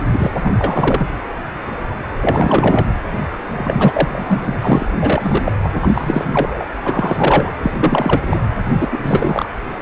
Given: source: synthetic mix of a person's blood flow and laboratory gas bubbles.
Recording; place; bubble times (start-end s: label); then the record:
Doppler ultrasound of blood flow; precordium
0.12-0.31 s: bubbles
0.42-0.55 s: bubbles
0.59-1.06 s: bubbles
2.21-2.92 s: bubbles
3.57-4.08 s: bubbles
4.12-4.58 s: bubbles
4.62-4.85 s: bubbles
5.01-5.52 s: bubbles
5.62-5.69 s: bubbles
5.75-6.65 s: bubbles
6.83-7.52 s: bubbles
7.62-7.71 s: bubbles
7.79-8.21 s: bubbles
8.26-8.38 s: bubbles
8.75-9.46 s: bubbles
From the record:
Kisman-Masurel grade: 333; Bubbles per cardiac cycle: rolling drumbeat, 9 or more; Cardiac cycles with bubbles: 50 to 99%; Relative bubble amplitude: loud (0.450 to 0.775); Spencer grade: 3 (all of the cardiac periods contain showers or single bubble signals, but not dominating or overriding the cardiac motion signals); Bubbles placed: anywhere in the cardiac cycle